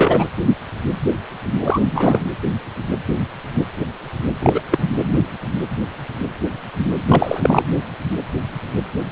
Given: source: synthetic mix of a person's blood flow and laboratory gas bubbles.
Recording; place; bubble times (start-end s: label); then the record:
Doppler ultrasound of blood flow; precordium
0.00-0.30 s: bubbles
1.62-1.80 s: bubbles
1.91-2.21 s: bubbles
4.41-4.61 s: bubbles
4.71-4.78 s: bubbles
7.08-7.62 s: bubbles
From the record:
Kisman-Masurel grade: 223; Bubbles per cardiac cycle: several, 3 to 8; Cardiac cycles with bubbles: 10 to 50%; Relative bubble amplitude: loud (0.450 to 0.775); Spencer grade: 2 (many but less than half of the cardiac periods contain bubble signals, singularly or in groups); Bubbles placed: anywhere in the cardiac cycle